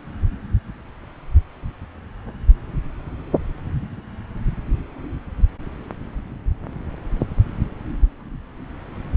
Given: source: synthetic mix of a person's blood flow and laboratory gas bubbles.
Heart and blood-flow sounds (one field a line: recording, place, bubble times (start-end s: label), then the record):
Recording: Doppler ultrasound of blood flow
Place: subclavian vein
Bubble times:
no bubbles
From the record:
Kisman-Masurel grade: 000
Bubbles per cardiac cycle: 0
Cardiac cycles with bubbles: 0%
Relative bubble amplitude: no bubbles discernible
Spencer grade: 0 (complete lack of bubble signals)